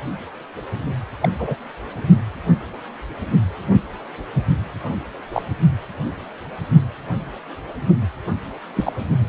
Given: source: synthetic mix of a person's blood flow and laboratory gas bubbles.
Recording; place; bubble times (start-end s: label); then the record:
Doppler ultrasound of blood flow; precordium
1.21-1.29 s: bubbles
1.39-1.56 s: bubbles
5.33-5.42 s: bubbles
8.75-8.92 s: bubbles
From the record:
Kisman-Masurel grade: 122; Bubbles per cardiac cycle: 1 to 2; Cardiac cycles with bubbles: 10 to 50%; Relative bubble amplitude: moderate (0.250 to 0.450); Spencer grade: 2 (many but less than half of the cardiac periods contain bubble signals, singularly or in groups); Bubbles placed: only in the low amplitude regions of the cardiac cycle